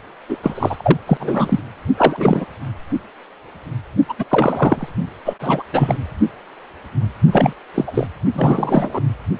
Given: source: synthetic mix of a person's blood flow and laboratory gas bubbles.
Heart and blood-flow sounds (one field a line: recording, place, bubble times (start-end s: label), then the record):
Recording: Doppler ultrasound of blood flow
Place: precordium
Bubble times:
0.28-0.37 s: bubbles
0.42-0.97 s: bubbles
1.06-1.17 s: bubbles
1.20-1.60 s: bubbles
1.97-2.45 s: bubbles
4.08-4.13 s: bubbles
4.18-4.25 s: bubbles
4.28-4.87 s: bubbles
5.25-5.34 s: bubbles
5.41-5.63 s: bubbles
5.72-5.97 s: bubbles
7.31-7.53 s: bubbles
7.75-7.84 s: bubbles
7.87-8.07 s: bubbles
8.34-9.01 s: bubbles
From the record:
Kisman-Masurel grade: 333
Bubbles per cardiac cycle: rolling drumbeat, 9 or more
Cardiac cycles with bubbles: 50 to 99%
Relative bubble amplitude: loud (0.450 to 0.775)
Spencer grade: 3 (all of the cardiac periods contain showers or single bubble signals, but not dominating or overriding the cardiac motion signals)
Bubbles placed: only in the low amplitude regions of the cardiac cycle